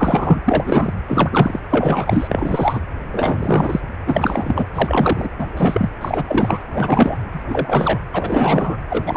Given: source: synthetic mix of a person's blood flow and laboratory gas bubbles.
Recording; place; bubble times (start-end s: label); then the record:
Doppler ultrasound of blood flow; precordium
0.00-0.40 s: bubbles
0.46-0.94 s: bubbles
1.07-1.60 s: bubbles
1.69-2.80 s: bubbles
3.12-3.81 s: bubbles
4.06-4.65 s: bubbles
4.74-5.29 s: bubbles
5.39-5.47 s: bubbles
5.57-5.90 s: bubbles
6.01-6.64 s: bubbles
6.72-7.17 s: bubbles
7.32-7.99 s: bubbles
8.13-8.78 s: bubbles
8.89-9.17 s: bubbles
From the record:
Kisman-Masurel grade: 343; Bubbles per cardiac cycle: rolling drumbeat, 9 or more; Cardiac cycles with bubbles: 100%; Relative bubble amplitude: loud (0.450 to 0.775); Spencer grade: 3 (all of the cardiac periods contain showers or single bubble signals, but not dominating or overriding the cardiac motion signals); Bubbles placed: anywhere in the cardiac cycle